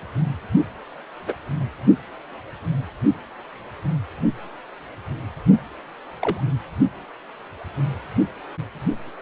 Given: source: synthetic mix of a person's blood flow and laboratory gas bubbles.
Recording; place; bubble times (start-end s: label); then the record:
Doppler ultrasound of blood flow; precordium
1.26-1.33 s: bubbles
6.22-6.43 s: bubbles
From the record:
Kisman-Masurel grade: 122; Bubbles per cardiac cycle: 1 to 2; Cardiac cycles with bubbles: 10 to 50%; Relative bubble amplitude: moderate (0.250 to 0.450); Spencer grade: 2 (many but less than half of the cardiac periods contain bubble signals, singularly or in groups); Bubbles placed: only in the low amplitude regions of the cardiac cycle